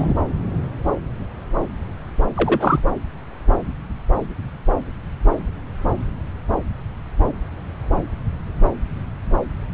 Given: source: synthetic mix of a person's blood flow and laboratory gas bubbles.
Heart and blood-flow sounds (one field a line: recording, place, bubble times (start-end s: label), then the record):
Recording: Doppler ultrasound of blood flow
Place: subclavian vein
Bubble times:
0.00-0.13 s: bubbles
2.35-2.79 s: bubbles
From the record:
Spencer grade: 1 (occasional bubble signal discernible with the cardiac motion signal, with majority of cardiac periods free of bubbles)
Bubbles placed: anywhere in the cardiac cycle